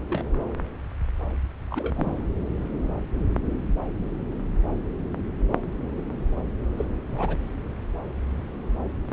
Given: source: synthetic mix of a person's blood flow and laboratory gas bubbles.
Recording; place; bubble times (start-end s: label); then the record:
Doppler ultrasound of blood flow; subclavian vein
0.10-0.26 s: bubbles
1.70-2.12 s: bubbles
2.17-2.23 s: bubbles
6.77-6.86 s: bubbles
7.10-7.37 s: bubbles
From the record:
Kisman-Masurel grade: 222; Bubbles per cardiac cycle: several, 3 to 8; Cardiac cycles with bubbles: 10 to 50%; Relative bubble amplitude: moderate (0.250 to 0.450); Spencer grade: 2 (many but less than half of the cardiac periods contain bubble signals, singularly or in groups); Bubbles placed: anywhere in the cardiac cycle